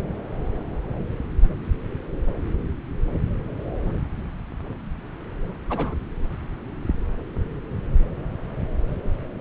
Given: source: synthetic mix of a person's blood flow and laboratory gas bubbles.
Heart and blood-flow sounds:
Doppler ultrasound of blood flow; subclavian vein
5.70-5.95 s: bubbles
From the record:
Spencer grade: 2 (many but less than half of the cardiac periods contain bubble signals, singularly or in groups); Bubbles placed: anywhere in the cardiac cycle

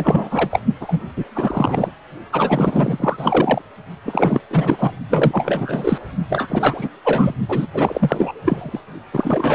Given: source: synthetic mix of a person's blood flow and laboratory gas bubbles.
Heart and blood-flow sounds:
Doppler ultrasound of blood flow; precordium
0.00-0.60 s: bubbles
0.80-1.02 s: bubbles
1.17-1.25 s: bubbles
1.33-1.91 s: bubbles
2.32-3.62 s: bubbles
4.04-4.41 s: bubbles
4.50-4.76 s: bubbles
4.79-4.97 s: bubbles
5.09-5.98 s: bubbles
6.29-6.88 s: bubbles
7.04-7.34 s: bubbles
7.48-7.67 s: bubbles
7.74-8.33 s: bubbles
8.45-8.80 s: bubbles
9.13-9.55 s: bubbles
From the record:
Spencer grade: 4 (maximum detectable bubble signal sounding continuously throughout systole and diastole of every cardiac period, and overriding the amplitude of the normal cardiac signals); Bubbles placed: only in the low amplitude regions of the cardiac cycle

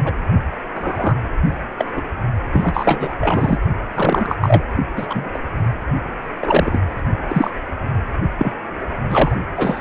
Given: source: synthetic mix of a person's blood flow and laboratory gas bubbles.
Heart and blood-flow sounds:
Doppler ultrasound of blood flow; precordium
0.04-0.14 s: bubbles
0.74-1.15 s: bubbles
1.78-2.02 s: bubbles
2.52-3.14 s: bubbles
3.20-3.57 s: bubbles
3.95-4.37 s: bubbles
4.41-4.63 s: bubbles
4.96-5.07 s: bubbles
5.09-5.29 s: bubbles
5.33-5.38 s: bubbles
6.42-6.78 s: bubbles
7.29-7.51 s: bubbles
8.38-8.52 s: bubbles
9.09-9.37 s: bubbles
9.57-9.81 s: bubbles
From the record:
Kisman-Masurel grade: 243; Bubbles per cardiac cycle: several, 3 to 8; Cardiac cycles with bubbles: 100%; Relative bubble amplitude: loud (0.450 to 0.775); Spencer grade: 3 (all of the cardiac periods contain showers or single bubble signals, but not dominating or overriding the cardiac motion signals); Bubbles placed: only in the low amplitude regions of the cardiac cycle

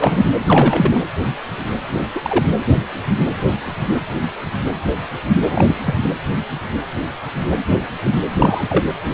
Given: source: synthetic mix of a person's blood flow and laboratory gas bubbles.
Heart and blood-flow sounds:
Doppler ultrasound of blood flow; precordium
0.00-0.32 s: bubbles
0.47-1.00 s: bubbles
1.97-2.06 s: bubbles
2.15-2.20 s: bubbles
2.23-2.45 s: bubbles
5.50-5.75 s: bubbles
5.84-5.94 s: bubbles
8.30-8.85 s: bubbles
From the record:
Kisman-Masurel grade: 223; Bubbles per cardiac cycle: several, 3 to 8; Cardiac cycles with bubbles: 10 to 50%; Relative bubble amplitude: loud (0.450 to 0.775); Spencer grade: 2 (many but less than half of the cardiac periods contain bubble signals, singularly or in groups); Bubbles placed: anywhere in the cardiac cycle

